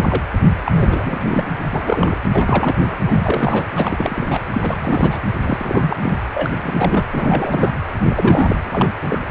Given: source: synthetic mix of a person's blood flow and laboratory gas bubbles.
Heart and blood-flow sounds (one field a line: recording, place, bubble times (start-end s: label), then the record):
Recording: Doppler ultrasound of blood flow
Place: precordium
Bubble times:
0.00-0.24 s: bubbles
0.66-0.72 s: bubbles
0.74-1.57 s: bubbles
1.73-2.15 s: bubbles
2.28-2.97 s: bubbles
3.05-3.67 s: bubbles
3.75-4.39 s: bubbles
4.50-5.19 s: bubbles
5.43-5.97 s: bubbles
6.02-6.18 s: bubbles
6.34-6.51 s: bubbles
6.55-7.04 s: bubbles
7.08-7.79 s: bubbles
8.04-8.59 s: bubbles
8.64-8.91 s: bubbles
9.01-9.19 s: bubbles
From the record:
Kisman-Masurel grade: 343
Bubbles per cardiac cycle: rolling drumbeat, 9 or more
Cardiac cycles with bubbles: 100%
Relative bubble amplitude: loud (0.450 to 0.775)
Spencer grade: 3 (all of the cardiac periods contain showers or single bubble signals, but not dominating or overriding the cardiac motion signals)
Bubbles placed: anywhere in the cardiac cycle